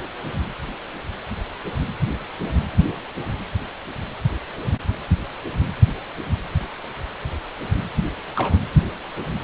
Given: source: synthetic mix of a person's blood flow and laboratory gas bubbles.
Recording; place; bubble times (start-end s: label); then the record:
Doppler ultrasound of blood flow; precordium
8.36-8.56 s: bubbles
From the record:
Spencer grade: 1 (occasional bubble signal discernible with the cardiac motion signal, with majority of cardiac periods free of bubbles); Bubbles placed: anywhere in the cardiac cycle